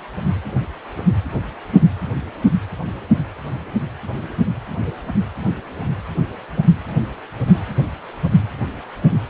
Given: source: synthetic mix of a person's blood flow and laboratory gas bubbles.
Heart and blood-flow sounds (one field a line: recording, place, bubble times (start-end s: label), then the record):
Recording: Doppler ultrasound of blood flow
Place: precordium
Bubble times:
no bubbles
From the record:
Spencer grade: 0 (complete lack of bubble signals)